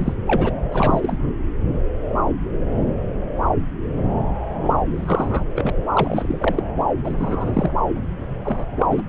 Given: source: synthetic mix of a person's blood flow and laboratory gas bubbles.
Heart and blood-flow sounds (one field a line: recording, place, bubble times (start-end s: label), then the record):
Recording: Doppler ultrasound of blood flow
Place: subclavian vein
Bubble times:
0.00-0.13 s: bubbles
0.27-0.51 s: bubbles
0.72-1.17 s: bubbles
4.63-4.74 s: bubbles
4.94-5.45 s: bubbles
5.56-5.70 s: bubbles
5.94-6.63 s: bubbles
7.04-7.71 s: bubbles
8.45-8.66 s: bubbles
8.79-8.86 s: bubbles
8.90-9.03 s: bubbles
From the record:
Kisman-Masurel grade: 232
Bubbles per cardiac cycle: several, 3 to 8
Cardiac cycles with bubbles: 50 to 99%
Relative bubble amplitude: moderate (0.250 to 0.450)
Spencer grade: 3 (all of the cardiac periods contain showers or single bubble signals, but not dominating or overriding the cardiac motion signals)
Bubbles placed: anywhere in the cardiac cycle